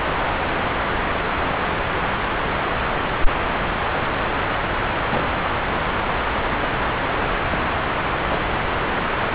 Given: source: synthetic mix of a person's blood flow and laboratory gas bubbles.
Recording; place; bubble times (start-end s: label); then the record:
Doppler ultrasound of blood flow; subclavian vein
0.51-0.68 s: bubbles
1.49-1.57 s: bubbles
5.11-5.23 s: bubbles
5.44-5.50 s: bubbles
6.59-6.68 s: bubbles
7.13-7.28 s: bubbles
7.50-7.58 s: bubbles
8.29-8.40 s: bubbles
From the record:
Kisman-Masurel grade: 121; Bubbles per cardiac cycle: 1 to 2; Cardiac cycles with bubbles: 10 to 50%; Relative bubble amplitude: barely perceptible (0.100 to 0.250); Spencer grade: 2 (many but less than half of the cardiac periods contain bubble signals, singularly or in groups); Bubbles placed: anywhere in the cardiac cycle